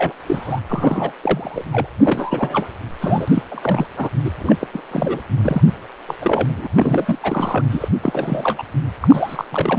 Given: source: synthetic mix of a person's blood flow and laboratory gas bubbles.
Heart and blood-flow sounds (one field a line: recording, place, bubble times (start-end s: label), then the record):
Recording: Doppler ultrasound of blood flow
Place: precordium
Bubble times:
0.00-0.14 s: bubbles
0.27-0.60 s: bubbles
0.69-1.12 s: bubbles
1.20-1.64 s: bubbles
1.72-1.87 s: bubbles
1.99-2.68 s: bubbles
3.01-3.43 s: bubbles
3.50-3.87 s: bubbles
3.96-4.09 s: bubbles
4.24-4.30 s: bubbles
4.39-4.56 s: bubbles
4.59-4.67 s: bubbles
4.74-4.82 s: bubbles
4.91-5.21 s: bubbles
5.43-5.61 s: bubbles
6.08-6.15 s: bubbles
6.21-6.68 s: bubbles
6.77-7.19 s: bubbles
7.23-7.65 s: bubbles
7.71-7.88 s: bubbles
8.02-8.63 s: bubbles
9.01-9.45 s: bubbles
9.51-9.79 s: bubbles
From the record:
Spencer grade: 3 (all of the cardiac periods contain showers or single bubble signals, but not dominating or overriding the cardiac motion signals)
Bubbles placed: anywhere in the cardiac cycle